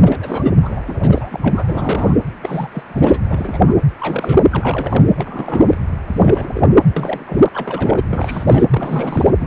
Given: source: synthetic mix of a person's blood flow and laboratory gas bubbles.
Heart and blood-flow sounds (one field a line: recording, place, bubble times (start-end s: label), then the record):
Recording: Doppler ultrasound of blood flow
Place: precordium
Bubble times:
0.02-0.52 s: bubbles
0.62-0.83 s: bubbles
0.86-2.15 s: bubbles
2.42-2.68 s: bubbles
2.71-2.83 s: bubbles
2.88-3.20 s: bubbles
3.24-3.60 s: bubbles
3.65-3.75 s: bubbles
4.00-4.43 s: bubbles
4.50-5.05 s: bubbles
5.17-5.78 s: bubbles
6.08-6.67 s: bubbles
6.96-7.49 s: bubbles
7.53-8.04 s: bubbles
8.09-8.64 s: bubbles
8.70-9.30 s: bubbles
9.38-9.47 s: bubbles
From the record:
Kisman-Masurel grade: 342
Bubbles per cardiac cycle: rolling drumbeat, 9 or more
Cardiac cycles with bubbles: 100%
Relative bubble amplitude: moderate (0.250 to 0.450)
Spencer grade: 3 (all of the cardiac periods contain showers or single bubble signals, but not dominating or overriding the cardiac motion signals)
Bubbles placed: anywhere in the cardiac cycle